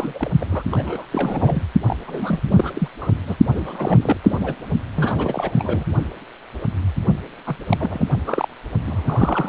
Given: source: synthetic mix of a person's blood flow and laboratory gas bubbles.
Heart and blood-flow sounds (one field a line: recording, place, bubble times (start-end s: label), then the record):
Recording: Doppler ultrasound of blood flow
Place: precordium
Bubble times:
0.00-0.30 s: bubbles
0.40-0.46 s: bubbles
0.50-0.63 s: bubbles
0.71-1.05 s: bubbles
1.12-1.62 s: bubbles
1.87-1.97 s: bubbles
2.07-2.40 s: bubbles
2.48-2.88 s: bubbles
3.01-3.08 s: bubbles
3.27-3.35 s: bubbles
3.48-4.17 s: bubbles
4.23-4.55 s: bubbles
4.95-5.52 s: bubbles
5.56-5.84 s: bubbles
7.46-7.55 s: bubbles
7.69-8.07 s: bubbles
8.26-8.48 s: bubbles
8.86-9.49 s: bubbles
From the record:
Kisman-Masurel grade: 332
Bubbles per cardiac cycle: rolling drumbeat, 9 or more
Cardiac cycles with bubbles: 50 to 99%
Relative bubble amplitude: moderate (0.250 to 0.450)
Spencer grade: 3 (all of the cardiac periods contain showers or single bubble signals, but not dominating or overriding the cardiac motion signals)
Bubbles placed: only in the low amplitude regions of the cardiac cycle